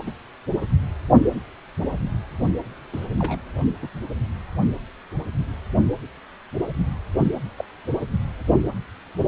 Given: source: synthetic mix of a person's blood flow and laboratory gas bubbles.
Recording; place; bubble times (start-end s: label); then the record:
Doppler ultrasound of blood flow; precordium
0.06-0.12 s: bubbles
2.92-3.07 s: bubbles
3.19-3.40 s: bubbles
3.82-3.88 s: bubbles
7.57-7.64 s: bubbles
From the record:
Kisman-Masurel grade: 121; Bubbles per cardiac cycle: 1 to 2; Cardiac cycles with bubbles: 10 to 50%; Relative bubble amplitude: barely perceptible (0.100 to 0.250); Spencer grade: 2 (many but less than half of the cardiac periods contain bubble signals, singularly or in groups); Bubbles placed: only in the low amplitude regions of the cardiac cycle